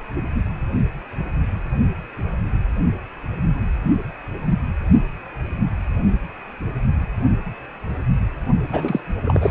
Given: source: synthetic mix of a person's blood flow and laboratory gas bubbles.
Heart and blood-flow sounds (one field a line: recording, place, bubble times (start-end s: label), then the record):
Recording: Doppler ultrasound of blood flow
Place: precordium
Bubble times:
8.69-9.00 s: bubbles
9.25-9.51 s: bubbles
From the record:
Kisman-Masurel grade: 212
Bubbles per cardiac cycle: several, 3 to 8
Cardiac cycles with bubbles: 1 to 10%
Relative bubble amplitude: moderate (0.250 to 0.450)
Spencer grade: 1 (occasional bubble signal discernible with the cardiac motion signal, with majority of cardiac periods free of bubbles)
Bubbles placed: only in the low amplitude regions of the cardiac cycle